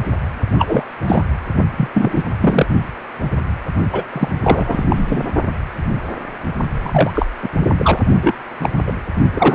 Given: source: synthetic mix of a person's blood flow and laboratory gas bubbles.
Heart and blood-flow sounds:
Doppler ultrasound of blood flow; precordium
0.58-0.82 s: bubbles
1.08-1.24 s: bubbles
1.77-1.90 s: bubbles
1.94-2.23 s: bubbles
2.41-2.66 s: bubbles
3.92-4.03 s: bubbles
4.12-4.28 s: bubbles
4.43-5.29 s: bubbles
6.82-7.10 s: bubbles
7.14-7.26 s: bubbles
7.42-7.49 s: bubbles
7.77-7.99 s: bubbles
8.21-8.35 s: bubbles
8.60-8.70 s: bubbles
8.87-8.92 s: bubbles
9.33-9.55 s: bubbles
From the record:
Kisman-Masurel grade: 233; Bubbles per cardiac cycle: several, 3 to 8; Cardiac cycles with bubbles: 50 to 99%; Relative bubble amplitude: loud (0.450 to 0.775); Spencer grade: 3 (all of the cardiac periods contain showers or single bubble signals, but not dominating or overriding the cardiac motion signals); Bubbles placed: only in the low amplitude regions of the cardiac cycle

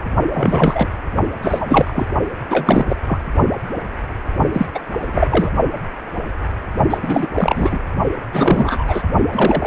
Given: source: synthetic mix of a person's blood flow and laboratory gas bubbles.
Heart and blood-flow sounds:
Doppler ultrasound of blood flow; precordium
0.34-0.88 s: bubbles
1.42-2.06 s: bubbles
2.50-2.85 s: bubbles
2.89-2.96 s: bubbles
3.07-3.19 s: bubbles
4.52-4.66 s: bubbles
4.74-4.79 s: bubbles
4.99-5.50 s: bubbles
6.90-6.98 s: bubbles
7.02-7.26 s: bubbles
7.34-7.78 s: bubbles
8.33-9.03 s: bubbles
9.33-9.67 s: bubbles
From the record:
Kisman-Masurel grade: 333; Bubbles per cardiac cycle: rolling drumbeat, 9 or more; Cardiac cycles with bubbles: 50 to 99%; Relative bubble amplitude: loud (0.450 to 0.775); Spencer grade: 3 (all of the cardiac periods contain showers or single bubble signals, but not dominating or overriding the cardiac motion signals); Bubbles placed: only in the low amplitude regions of the cardiac cycle

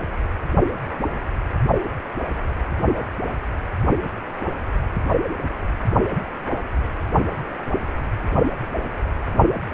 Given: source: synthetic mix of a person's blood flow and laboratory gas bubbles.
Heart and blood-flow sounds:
Doppler ultrasound of blood flow; precordium
no bubbles
From the record:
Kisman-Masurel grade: 000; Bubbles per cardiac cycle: 0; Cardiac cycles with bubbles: 0%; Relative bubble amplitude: no bubbles discernible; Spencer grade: 0 (complete lack of bubble signals)

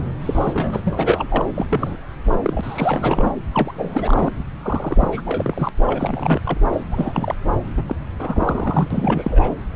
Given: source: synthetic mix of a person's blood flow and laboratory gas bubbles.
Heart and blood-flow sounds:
Doppler ultrasound of blood flow; subclavian vein
0.21-1.45 s: bubbles
1.54-1.67 s: bubbles
1.69-1.96 s: bubbles
2.31-2.40 s: bubbles
2.42-3.31 s: bubbles
3.54-3.72 s: bubbles
3.76-4.31 s: bubbles
4.62-5.08 s: bubbles
5.12-5.21 s: bubbles
5.25-5.69 s: bubbles
5.86-6.40 s: bubbles
6.45-6.58 s: bubbles
6.72-6.80 s: bubbles
6.91-7.35 s: bubbles
7.76-7.83 s: bubbles
7.86-7.95 s: bubbles
8.19-9.53 s: bubbles
From the record:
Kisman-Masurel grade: 342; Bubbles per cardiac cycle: rolling drumbeat, 9 or more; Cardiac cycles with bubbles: 100%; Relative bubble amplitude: moderate (0.250 to 0.450); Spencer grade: 3 (all of the cardiac periods contain showers or single bubble signals, but not dominating or overriding the cardiac motion signals); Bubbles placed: anywhere in the cardiac cycle

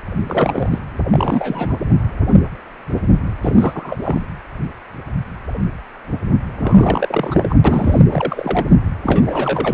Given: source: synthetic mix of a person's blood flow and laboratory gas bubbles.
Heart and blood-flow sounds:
Doppler ultrasound of blood flow; precordium
0.23-0.79 s: bubbles
1.07-1.76 s: bubbles
3.41-3.98 s: bubbles
4.02-4.27 s: bubbles
6.57-7.57 s: bubbles
7.64-8.01 s: bubbles
8.09-8.69 s: bubbles
9.03-9.74 s: bubbles
From the record:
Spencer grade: 3 (all of the cardiac periods contain showers or single bubble signals, but not dominating or overriding the cardiac motion signals); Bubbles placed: anywhere in the cardiac cycle

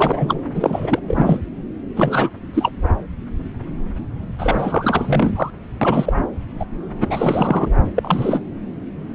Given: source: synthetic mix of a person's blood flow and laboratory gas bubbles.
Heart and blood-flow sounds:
Doppler ultrasound of blood flow; subclavian vein
0.00-0.39 s: bubbles
0.54-0.99 s: bubbles
1.08-1.40 s: bubbles
1.96-2.29 s: bubbles
2.53-2.71 s: bubbles
4.38-5.50 s: bubbles
5.81-6.13 s: bubbles
6.59-6.65 s: bubbles
7.00-7.70 s: bubbles
7.95-8.44 s: bubbles
From the record:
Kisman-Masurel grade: 333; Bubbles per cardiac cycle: rolling drumbeat, 9 or more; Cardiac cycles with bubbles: 50 to 99%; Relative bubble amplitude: loud (0.450 to 0.775); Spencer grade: 3 (all of the cardiac periods contain showers or single bubble signals, but not dominating or overriding the cardiac motion signals); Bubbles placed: anywhere in the cardiac cycle

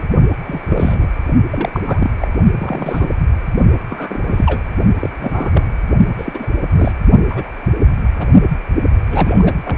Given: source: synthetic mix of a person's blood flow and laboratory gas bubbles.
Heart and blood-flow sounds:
Doppler ultrasound of blood flow; precordium
0.00-0.02 s: bubbles
0.46-1.07 s: bubbles
1.51-1.70 s: bubbles
1.74-2.10 s: bubbles
2.19-2.28 s: bubbles
2.58-3.12 s: bubbles
3.90-4.19 s: bubbles
4.25-4.62 s: bubbles
5.00-5.09 s: bubbles
5.19-5.72 s: bubbles
6.18-6.47 s: bubbles
6.70-6.92 s: bubbles
7.29-7.50 s: bubbles
8.19-8.27 s: bubbles
9.10-9.55 s: bubbles
9.64-9.78 s: bubbles
From the record:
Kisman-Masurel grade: 242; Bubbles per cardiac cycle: several, 3 to 8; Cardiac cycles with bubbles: 100%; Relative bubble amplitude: moderate (0.250 to 0.450); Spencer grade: 3 (all of the cardiac periods contain showers or single bubble signals, but not dominating or overriding the cardiac motion signals); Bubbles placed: only in the low amplitude regions of the cardiac cycle

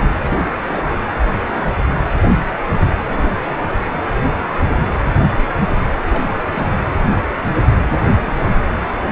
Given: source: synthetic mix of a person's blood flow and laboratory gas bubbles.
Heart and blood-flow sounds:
Doppler ultrasound of blood flow; precordium
0.00-0.09 s: bubbles
0.19-0.87 s: bubbles
3.05-3.54 s: bubbles
6.05-6.82 s: bubbles
7.95-8.51 s: bubbles
From the record:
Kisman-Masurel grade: 221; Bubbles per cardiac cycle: several, 3 to 8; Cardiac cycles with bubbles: 10 to 50%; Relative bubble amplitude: barely perceptible (0.100 to 0.250); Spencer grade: 2 (many but less than half of the cardiac periods contain bubble signals, singularly or in groups); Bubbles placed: anywhere in the cardiac cycle

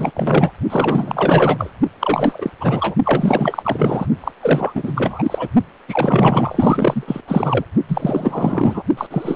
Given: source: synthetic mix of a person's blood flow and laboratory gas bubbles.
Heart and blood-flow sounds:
Doppler ultrasound of blood flow; precordium
0.00-0.11 s: bubbles
0.14-0.51 s: bubbles
0.70-1.72 s: bubbles
2.00-2.50 s: bubbles
2.60-2.95 s: bubbles
3.04-4.06 s: bubbles
4.20-4.31 s: bubbles
4.42-5.48 s: bubbles
5.88-7.04 s: bubbles
7.07-7.21 s: bubbles
7.27-7.65 s: bubbles
7.88-8.83 s: bubbles
8.97-9.07 s: bubbles
9.11-9.36 s: bubbles
From the record:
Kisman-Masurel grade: 444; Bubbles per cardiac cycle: continuous sound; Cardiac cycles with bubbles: 100%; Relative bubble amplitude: maximal (0.775 to 0.999); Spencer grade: 4 (maximum detectable bubble signal sounding continuously throughout systole and diastole of every cardiac period, and overriding the amplitude of the normal cardiac signals); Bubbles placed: only in the low amplitude regions of the cardiac cycle

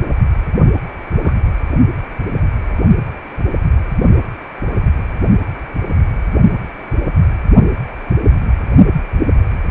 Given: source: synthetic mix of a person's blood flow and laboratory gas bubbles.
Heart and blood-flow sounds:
Doppler ultrasound of blood flow; precordium
1.21-1.33 s: bubbles
From the record:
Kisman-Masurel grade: 121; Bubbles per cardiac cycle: 1 to 2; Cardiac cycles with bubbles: 10 to 50%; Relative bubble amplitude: barely perceptible (0.100 to 0.250); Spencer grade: 2 (many but less than half of the cardiac periods contain bubble signals, singularly or in groups); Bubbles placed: only in the low amplitude regions of the cardiac cycle

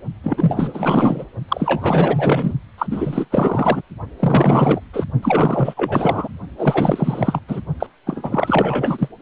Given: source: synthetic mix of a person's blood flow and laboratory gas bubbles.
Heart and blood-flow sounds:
Doppler ultrasound of blood flow; precordium
0.23-1.25 s: bubbles
1.48-2.53 s: bubbles
2.78-2.87 s: bubbles
2.91-3.26 s: bubbles
3.31-3.82 s: bubbles
4.19-4.80 s: bubbles
4.93-5.05 s: bubbles
5.22-6.28 s: bubbles
6.58-7.40 s: bubbles
7.48-7.61 s: bubbles
7.80-7.86 s: bubbles
8.06-9.08 s: bubbles
From the record:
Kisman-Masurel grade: 444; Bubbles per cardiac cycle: continuous sound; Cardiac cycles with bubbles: 100%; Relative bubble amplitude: maximal (0.775 to 0.999); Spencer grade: 4 (maximum detectable bubble signal sounding continuously throughout systole and diastole of every cardiac period, and overriding the amplitude of the normal cardiac signals); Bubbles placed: only in the low amplitude regions of the cardiac cycle

